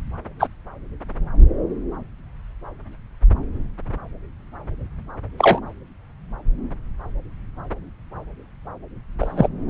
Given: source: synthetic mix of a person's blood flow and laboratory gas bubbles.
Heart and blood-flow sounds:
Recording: Doppler ultrasound of blood flow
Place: subclavian vein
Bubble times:
0.39-0.48 s: bubbles
5.38-5.60 s: bubbles
9.19-9.48 s: bubbles
From the record:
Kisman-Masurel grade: 123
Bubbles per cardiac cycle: 1 to 2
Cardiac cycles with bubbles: 10 to 50%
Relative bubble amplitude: loud (0.450 to 0.775)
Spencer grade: 2 (many but less than half of the cardiac periods contain bubble signals, singularly or in groups)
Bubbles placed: anywhere in the cardiac cycle

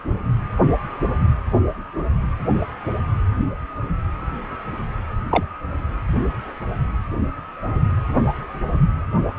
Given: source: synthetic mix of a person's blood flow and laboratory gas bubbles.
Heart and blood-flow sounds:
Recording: Doppler ultrasound of blood flow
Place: precordium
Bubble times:
5.30-5.43 s: bubbles
From the record:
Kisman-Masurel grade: 123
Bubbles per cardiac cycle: 1 to 2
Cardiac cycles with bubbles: 10 to 50%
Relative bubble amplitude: loud (0.450 to 0.775)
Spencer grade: 2 (many but less than half of the cardiac periods contain bubble signals, singularly or in groups)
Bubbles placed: only in the low amplitude regions of the cardiac cycle

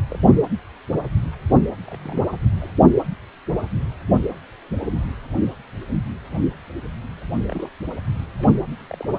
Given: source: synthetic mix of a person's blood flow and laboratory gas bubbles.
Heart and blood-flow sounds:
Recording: Doppler ultrasound of blood flow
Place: precordium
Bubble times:
0.10-0.19 s: bubbles
0.25-0.36 s: bubbles
1.86-2.24 s: bubbles
2.60-2.71 s: bubbles
7.48-7.69 s: bubbles
8.39-8.53 s: bubbles
8.78-8.87 s: bubbles
8.89-9.09 s: bubbles
From the record:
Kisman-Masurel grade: 121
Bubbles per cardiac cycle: 1 to 2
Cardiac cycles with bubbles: 10 to 50%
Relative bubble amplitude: barely perceptible (0.100 to 0.250)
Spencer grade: 2 (many but less than half of the cardiac periods contain bubble signals, singularly or in groups)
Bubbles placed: anywhere in the cardiac cycle

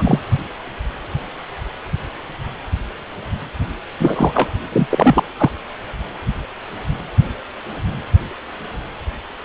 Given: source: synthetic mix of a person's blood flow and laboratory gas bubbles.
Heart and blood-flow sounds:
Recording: Doppler ultrasound of blood flow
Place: precordium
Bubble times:
0.00-0.18 s: bubbles
3.99-4.49 s: bubbles
4.72-4.87 s: bubbles
4.89-5.23 s: bubbles
5.38-5.50 s: bubbles
From the record:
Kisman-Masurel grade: 223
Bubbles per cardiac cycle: several, 3 to 8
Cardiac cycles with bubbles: 10 to 50%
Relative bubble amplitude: loud (0.450 to 0.775)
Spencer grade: 2 (many but less than half of the cardiac periods contain bubble signals, singularly or in groups)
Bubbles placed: anywhere in the cardiac cycle

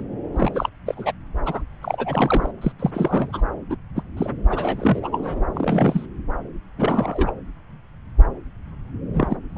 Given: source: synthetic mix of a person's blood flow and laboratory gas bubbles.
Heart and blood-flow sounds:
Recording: Doppler ultrasound of blood flow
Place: subclavian vein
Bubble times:
0.00-0.03 s: bubbles
0.32-0.70 s: bubbles
0.86-1.12 s: bubbles
1.45-1.62 s: bubbles
1.81-2.51 s: bubbles
2.61-2.72 s: bubbles
2.79-2.90 s: bubbles
2.94-3.41 s: bubbles
3.69-3.77 s: bubbles
3.96-4.03 s: bubbles
4.17-4.31 s: bubbles
4.49-5.40 s: bubbles
5.54-6.06 s: bubbles
6.78-7.32 s: bubbles
9.13-9.36 s: bubbles
9.50-9.58 s: bubbles
From the record:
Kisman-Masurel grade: 232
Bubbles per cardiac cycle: several, 3 to 8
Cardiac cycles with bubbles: 50 to 99%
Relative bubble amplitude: moderate (0.250 to 0.450)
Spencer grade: 3 (all of the cardiac periods contain showers or single bubble signals, but not dominating or overriding the cardiac motion signals)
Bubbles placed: anywhere in the cardiac cycle

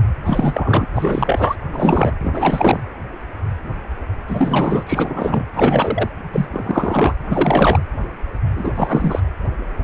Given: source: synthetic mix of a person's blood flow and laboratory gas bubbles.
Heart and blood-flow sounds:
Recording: Doppler ultrasound of blood flow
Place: precordium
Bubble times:
0.25-0.87 s: bubbles
0.95-1.55 s: bubbles
1.71-2.11 s: bubbles
2.20-2.80 s: bubbles
4.28-5.45 s: bubbles
5.54-6.09 s: bubbles
6.33-6.46 s: bubbles
6.51-7.15 s: bubbles
7.29-7.79 s: bubbles
8.55-9.20 s: bubbles
From the record:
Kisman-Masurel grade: 333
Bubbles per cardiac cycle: rolling drumbeat, 9 or more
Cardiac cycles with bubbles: 50 to 99%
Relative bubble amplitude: loud (0.450 to 0.775)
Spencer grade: 3 (all of the cardiac periods contain showers or single bubble signals, but not dominating or overriding the cardiac motion signals)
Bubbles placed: anywhere in the cardiac cycle

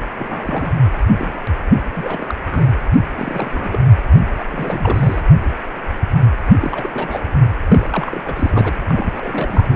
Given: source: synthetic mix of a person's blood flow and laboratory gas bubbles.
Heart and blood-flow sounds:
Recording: Doppler ultrasound of blood flow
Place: precordium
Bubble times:
0.18-0.73 s: bubbles
1.17-1.39 s: bubbles
1.95-2.35 s: bubbles
2.51-2.69 s: bubbles
2.96-3.06 s: bubbles
3.18-3.81 s: bubbles
4.09-4.20 s: bubbles
4.38-4.45 s: bubbles
4.52-5.22 s: bubbles
6.58-6.89 s: bubbles
6.95-7.20 s: bubbles
7.68-8.23 s: bubbles
8.26-8.76 s: bubbles
8.85-9.76 s: bubbles
From the record:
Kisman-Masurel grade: 332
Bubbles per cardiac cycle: rolling drumbeat, 9 or more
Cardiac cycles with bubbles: 50 to 99%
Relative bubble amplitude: moderate (0.250 to 0.450)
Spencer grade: 3 (all of the cardiac periods contain showers or single bubble signals, but not dominating or overriding the cardiac motion signals)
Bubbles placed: anywhere in the cardiac cycle

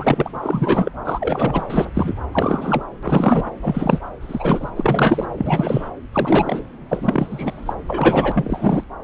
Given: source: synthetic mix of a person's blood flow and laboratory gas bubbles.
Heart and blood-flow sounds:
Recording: Doppler ultrasound of blood flow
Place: subclavian vein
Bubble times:
0.00-0.32 s: bubbles
0.42-0.91 s: bubbles
1.04-1.65 s: bubbles
1.70-1.90 s: bubbles
1.94-2.17 s: bubbles
2.31-2.85 s: bubbles
3.02-3.43 s: bubbles
3.62-3.98 s: bubbles
4.21-4.70 s: bubbles
4.75-5.25 s: bubbles
5.38-5.89 s: bubbles
6.12-6.63 s: bubbles
6.89-7.73 s: bubbles
7.89-8.83 s: bubbles
From the record:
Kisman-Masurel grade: 343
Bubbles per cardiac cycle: rolling drumbeat, 9 or more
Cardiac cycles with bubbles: 100%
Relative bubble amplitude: loud (0.450 to 0.775)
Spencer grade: 3 (all of the cardiac periods contain showers or single bubble signals, but not dominating or overriding the cardiac motion signals)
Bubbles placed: anywhere in the cardiac cycle

